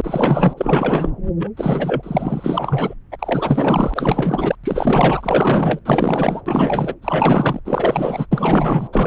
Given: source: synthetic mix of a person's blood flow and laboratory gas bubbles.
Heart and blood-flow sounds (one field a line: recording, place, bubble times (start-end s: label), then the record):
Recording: Doppler ultrasound of blood flow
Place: subclavian vein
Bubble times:
0.00-0.54 s: bubbles
0.57-1.10 s: bubbles
1.39-1.50 s: bubbles
1.56-2.94 s: bubbles
3.12-4.55 s: bubbles
4.63-5.80 s: bubbles
5.85-6.42 s: bubbles
6.46-6.94 s: bubbles
7.02-7.60 s: bubbles
7.65-8.26 s: bubbles
8.32-8.88 s: bubbles
8.93-9.07 s: bubbles
From the record:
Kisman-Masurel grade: 444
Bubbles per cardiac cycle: continuous sound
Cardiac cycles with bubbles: 100%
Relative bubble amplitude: maximal (0.775 to 0.999)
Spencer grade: 4 (maximum detectable bubble signal sounding continuously throughout systole and diastole of every cardiac period, and overriding the amplitude of the normal cardiac signals)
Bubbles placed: anywhere in the cardiac cycle